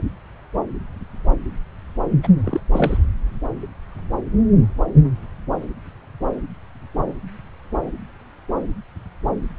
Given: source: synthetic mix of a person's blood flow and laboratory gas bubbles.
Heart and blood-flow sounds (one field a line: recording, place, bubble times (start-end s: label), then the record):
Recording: Doppler ultrasound of blood flow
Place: subclavian vein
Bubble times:
2.23-2.27 s: bubbles
2.44-2.60 s: bubbles
2.72-2.97 s: bubbles
From the record:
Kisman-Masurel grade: 212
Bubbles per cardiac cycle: several, 3 to 8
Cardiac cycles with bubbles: 1 to 10%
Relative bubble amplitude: moderate (0.250 to 0.450)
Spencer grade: 1 (occasional bubble signal discernible with the cardiac motion signal, with majority of cardiac periods free of bubbles)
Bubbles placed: anywhere in the cardiac cycle